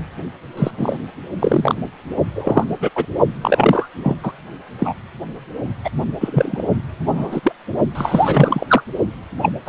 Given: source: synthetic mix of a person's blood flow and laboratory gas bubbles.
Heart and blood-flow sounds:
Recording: Doppler ultrasound of blood flow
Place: precordium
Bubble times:
0.57-0.71 s: bubbles
0.77-0.98 s: bubbles
1.39-1.75 s: bubbles
2.35-2.65 s: bubbles
2.80-2.91 s: bubbles
2.95-3.06 s: bubbles
3.42-3.88 s: bubbles
3.96-4.16 s: bubbles
4.23-4.32 s: bubbles
4.79-4.94 s: bubbles
5.84-5.90 s: bubbles
6.20-6.62 s: bubbles
7.06-7.41 s: bubbles
7.43-7.52 s: bubbles
7.95-8.82 s: bubbles
9.42-9.52 s: bubbles
9.65-9.69 s: bubbles
From the record:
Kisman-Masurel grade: 243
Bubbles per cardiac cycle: several, 3 to 8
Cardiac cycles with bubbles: 100%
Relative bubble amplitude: loud (0.450 to 0.775)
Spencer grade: 3 (all of the cardiac periods contain showers or single bubble signals, but not dominating or overriding the cardiac motion signals)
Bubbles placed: only in the low amplitude regions of the cardiac cycle

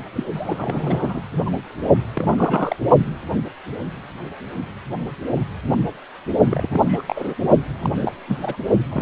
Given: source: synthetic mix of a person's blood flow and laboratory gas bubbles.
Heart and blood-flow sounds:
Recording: Doppler ultrasound of blood flow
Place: precordium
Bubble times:
0.16-0.23 s: bubbles
0.33-1.21 s: bubbles
1.46-1.50 s: bubbles
1.83-1.90 s: bubbles
2.13-2.76 s: bubbles
6.50-7.03 s: bubbles
7.07-7.34 s: bubbles
7.79-8.12 s: bubbles
8.27-8.38 s: bubbles
8.41-8.55 s: bubbles
8.91-9.02 s: bubbles
From the record:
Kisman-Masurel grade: 332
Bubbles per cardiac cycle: rolling drumbeat, 9 or more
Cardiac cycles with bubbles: 50 to 99%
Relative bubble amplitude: moderate (0.250 to 0.450)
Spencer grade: 3 (all of the cardiac periods contain showers or single bubble signals, but not dominating or overriding the cardiac motion signals)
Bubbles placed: only in the low amplitude regions of the cardiac cycle

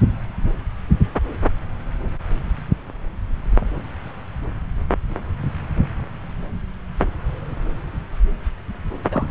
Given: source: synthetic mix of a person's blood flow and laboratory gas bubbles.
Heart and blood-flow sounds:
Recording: Doppler ultrasound of blood flow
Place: subclavian vein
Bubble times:
9.11-9.31 s: bubbles
From the record:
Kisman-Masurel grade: 212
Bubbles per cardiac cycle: several, 3 to 8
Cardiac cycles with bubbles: 1 to 10%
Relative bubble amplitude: moderate (0.250 to 0.450)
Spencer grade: 1 (occasional bubble signal discernible with the cardiac motion signal, with majority of cardiac periods free of bubbles)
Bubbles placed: anywhere in the cardiac cycle

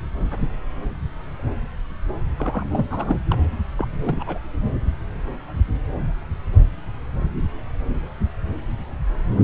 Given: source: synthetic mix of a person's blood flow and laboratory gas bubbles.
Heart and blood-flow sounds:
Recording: Doppler ultrasound of blood flow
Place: subclavian vein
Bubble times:
2.36-2.66 s: bubbles
2.73-2.86 s: bubbles
2.90-3.18 s: bubbles
3.28-3.35 s: bubbles
3.77-3.86 s: bubbles
4.01-4.24 s: bubbles
4.27-4.39 s: bubbles
From the record:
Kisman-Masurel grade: 221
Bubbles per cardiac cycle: several, 3 to 8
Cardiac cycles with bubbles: 10 to 50%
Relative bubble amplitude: barely perceptible (0.100 to 0.250)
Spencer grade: 2 (many but less than half of the cardiac periods contain bubble signals, singularly or in groups)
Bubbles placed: anywhere in the cardiac cycle

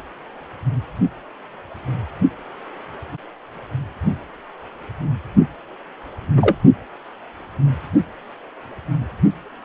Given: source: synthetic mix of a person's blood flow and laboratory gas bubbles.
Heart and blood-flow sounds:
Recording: Doppler ultrasound of blood flow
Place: precordium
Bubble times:
6.37-6.55 s: bubbles
From the record:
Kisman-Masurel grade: 123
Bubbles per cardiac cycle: 1 to 2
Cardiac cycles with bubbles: 10 to 50%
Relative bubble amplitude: loud (0.450 to 0.775)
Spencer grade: 2 (many but less than half of the cardiac periods contain bubble signals, singularly or in groups)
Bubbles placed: anywhere in the cardiac cycle

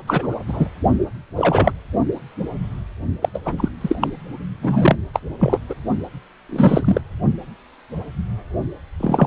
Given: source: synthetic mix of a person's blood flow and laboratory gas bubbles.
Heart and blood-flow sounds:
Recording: Doppler ultrasound of blood flow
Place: precordium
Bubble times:
0.07-0.35 s: bubbles
0.48-0.68 s: bubbles
1.36-1.72 s: bubbles
3.22-3.29 s: bubbles
3.34-3.39 s: bubbles
3.45-3.69 s: bubbles
3.81-3.96 s: bubbles
4.01-4.10 s: bubbles
4.62-4.96 s: bubbles
5.14-5.20 s: bubbles
5.40-5.58 s: bubbles
5.69-5.74 s: bubbles
6.49-7.01 s: bubbles
9.00-9.26 s: bubbles
From the record:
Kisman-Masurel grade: 233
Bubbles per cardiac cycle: several, 3 to 8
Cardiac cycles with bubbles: 50 to 99%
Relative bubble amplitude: loud (0.450 to 0.775)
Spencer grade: 3 (all of the cardiac periods contain showers or single bubble signals, but not dominating or overriding the cardiac motion signals)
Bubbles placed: only in the low amplitude regions of the cardiac cycle

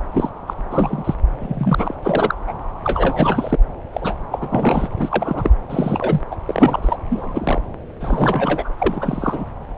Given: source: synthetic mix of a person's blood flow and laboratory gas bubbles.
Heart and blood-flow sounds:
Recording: Doppler ultrasound of blood flow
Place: subclavian vein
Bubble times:
0.14-0.29 s: bubbles
0.47-0.54 s: bubbles
0.70-1.15 s: bubbles
1.39-1.95 s: bubbles
2.02-2.35 s: bubbles
2.47-2.53 s: bubbles
2.83-3.56 s: bubbles
3.93-4.15 s: bubbles
4.31-4.89 s: bubbles
4.96-5.51 s: bubbles
5.70-6.22 s: bubbles
6.31-6.36 s: bubbles
6.46-6.97 s: bubbles
7.10-7.62 s: bubbles
8.00-8.70 s: bubbles
8.78-9.45 s: bubbles
From the record:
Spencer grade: 3 (all of the cardiac periods contain showers or single bubble signals, but not dominating or overriding the cardiac motion signals)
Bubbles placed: anywhere in the cardiac cycle

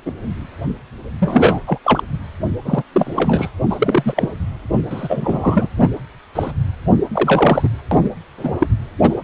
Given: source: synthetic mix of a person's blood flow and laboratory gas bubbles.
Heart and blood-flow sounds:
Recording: Doppler ultrasound of blood flow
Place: precordium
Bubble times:
0.05-0.14 s: bubbles
1.20-1.60 s: bubbles
1.67-1.78 s: bubbles
1.84-2.02 s: bubbles
2.65-2.83 s: bubbles
2.93-3.50 s: bubbles
3.69-4.40 s: bubbles
4.72-4.82 s: bubbles
4.89-5.68 s: bubbles
5.78-5.88 s: bubbles
6.35-6.51 s: bubbles
7.12-7.69 s: bubbles
7.91-8.10 s: bubbles
8.38-8.52 s: bubbles
8.59-8.67 s: bubbles
9.01-9.16 s: bubbles
From the record:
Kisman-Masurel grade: 243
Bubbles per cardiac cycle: several, 3 to 8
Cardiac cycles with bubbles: 100%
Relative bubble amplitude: loud (0.450 to 0.775)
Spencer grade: 3 (all of the cardiac periods contain showers or single bubble signals, but not dominating or overriding the cardiac motion signals)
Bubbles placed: anywhere in the cardiac cycle

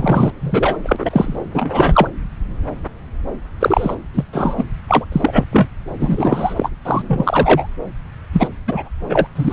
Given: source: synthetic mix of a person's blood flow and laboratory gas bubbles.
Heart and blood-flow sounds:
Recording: Doppler ultrasound of blood flow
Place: subclavian vein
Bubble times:
0.00-0.32 s: bubbles
0.41-0.77 s: bubbles
0.82-1.37 s: bubbles
1.54-2.07 s: bubbles
3.59-3.95 s: bubbles
4.14-4.24 s: bubbles
4.33-4.64 s: bubbles
4.88-5.06 s: bubbles
5.12-5.44 s: bubbles
5.52-5.69 s: bubbles
5.99-6.70 s: bubbles
6.85-7.68 s: bubbles
8.33-8.49 s: bubbles
8.67-8.89 s: bubbles
9.09-9.28 s: bubbles
9.35-9.53 s: bubbles
From the record:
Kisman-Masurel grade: 333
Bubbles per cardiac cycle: rolling drumbeat, 9 or more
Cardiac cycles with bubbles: 50 to 99%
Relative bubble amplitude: loud (0.450 to 0.775)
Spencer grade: 3 (all of the cardiac periods contain showers or single bubble signals, but not dominating or overriding the cardiac motion signals)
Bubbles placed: anywhere in the cardiac cycle

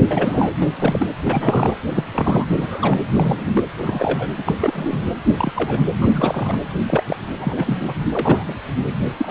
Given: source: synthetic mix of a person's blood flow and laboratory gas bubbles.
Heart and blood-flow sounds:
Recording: Doppler ultrasound of blood flow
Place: precordium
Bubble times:
0.10-0.51 s: bubbles
0.60-0.71 s: bubbles
0.80-1.06 s: bubbles
1.25-1.77 s: bubbles
1.95-2.04 s: bubbles
2.12-2.45 s: bubbles
2.58-2.99 s: bubbles
3.12-3.64 s: bubbles
3.78-4.29 s: bubbles
4.38-4.43 s: bubbles
4.46-5.00 s: bubbles
5.37-5.86 s: bubbles
6.01-6.58 s: bubbles
6.87-7.04 s: bubbles
7.07-7.16 s: bubbles
7.39-7.99 s: bubbles
8.12-8.55 s: bubbles
8.85-8.93 s: bubbles
9.17-9.31 s: bubbles
From the record:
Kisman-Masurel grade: 242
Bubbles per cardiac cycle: several, 3 to 8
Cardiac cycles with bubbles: 100%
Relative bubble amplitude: moderate (0.250 to 0.450)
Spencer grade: 3 (all of the cardiac periods contain showers or single bubble signals, but not dominating or overriding the cardiac motion signals)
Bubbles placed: anywhere in the cardiac cycle

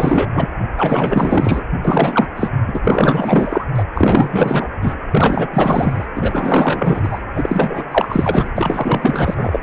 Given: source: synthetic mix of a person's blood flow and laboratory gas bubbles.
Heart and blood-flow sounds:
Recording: Doppler ultrasound of blood flow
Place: precordium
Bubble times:
0.00-0.49 s: bubbles
0.77-1.65 s: bubbles
1.85-2.27 s: bubbles
2.36-2.50 s: bubbles
2.67-2.80 s: bubbles
2.83-3.65 s: bubbles
3.73-3.84 s: bubbles
3.94-4.70 s: bubbles
4.80-4.94 s: bubbles
5.12-5.48 s: bubbles
5.54-6.07 s: bubbles
6.15-7.21 s: bubbles
7.35-7.84 s: bubbles
7.91-8.51 s: bubbles
8.57-9.59 s: bubbles
From the record:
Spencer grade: 4 (maximum detectable bubble signal sounding continuously throughout systole and diastole of every cardiac period, and overriding the amplitude of the normal cardiac signals)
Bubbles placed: anywhere in the cardiac cycle

